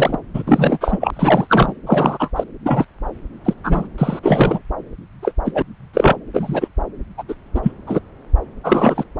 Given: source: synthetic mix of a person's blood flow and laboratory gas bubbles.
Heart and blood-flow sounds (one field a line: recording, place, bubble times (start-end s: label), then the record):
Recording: Doppler ultrasound of blood flow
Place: subclavian vein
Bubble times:
0.00-0.19 s: bubbles
0.34-0.43 s: bubbles
0.46-0.78 s: bubbles
0.80-1.10 s: bubbles
1.13-1.73 s: bubbles
1.86-2.30 s: bubbles
2.36-2.44 s: bubbles
2.65-2.85 s: bubbles
3.44-3.53 s: bubbles
3.64-3.88 s: bubbles
3.98-4.20 s: bubbles
4.22-4.59 s: bubbles
5.22-5.32 s: bubbles
5.45-5.52 s: bubbles
5.54-5.62 s: bubbles
5.94-6.17 s: bubbles
6.33-6.68 s: bubbles
7.18-7.23 s: bubbles
7.28-7.35 s: bubbles
7.54-7.61 s: bubbles
7.63-7.71 s: bubbles
7.87-7.99 s: bubbles
8.63-9.04 s: bubbles
From the record:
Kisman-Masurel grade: 243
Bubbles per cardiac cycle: several, 3 to 8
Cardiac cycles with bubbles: 100%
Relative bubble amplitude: loud (0.450 to 0.775)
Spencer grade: 3 (all of the cardiac periods contain showers or single bubble signals, but not dominating or overriding the cardiac motion signals)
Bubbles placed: anywhere in the cardiac cycle